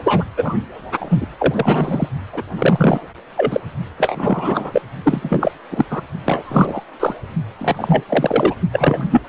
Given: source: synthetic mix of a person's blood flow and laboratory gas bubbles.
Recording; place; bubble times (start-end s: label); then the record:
Doppler ultrasound of blood flow; precordium
0.00-0.23 s: bubbles
0.37-0.55 s: bubbles
0.99-1.27 s: bubbles
1.38-2.08 s: bubbles
2.33-2.43 s: bubbles
2.56-3.01 s: bubbles
3.37-3.60 s: bubbles
3.98-4.82 s: bubbles
5.04-5.51 s: bubbles
5.71-5.85 s: bubbles
5.90-6.01 s: bubbles
6.25-6.84 s: bubbles
7.00-7.15 s: bubbles
7.58-8.04 s: bubbles
8.08-8.54 s: bubbles
8.72-9.07 s: bubbles
9.09-9.21 s: bubbles
From the record:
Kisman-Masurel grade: 343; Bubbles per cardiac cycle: rolling drumbeat, 9 or more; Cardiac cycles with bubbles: 100%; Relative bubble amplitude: loud (0.450 to 0.775); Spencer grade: 3 (all of the cardiac periods contain showers or single bubble signals, but not dominating or overriding the cardiac motion signals); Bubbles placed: only in the low amplitude regions of the cardiac cycle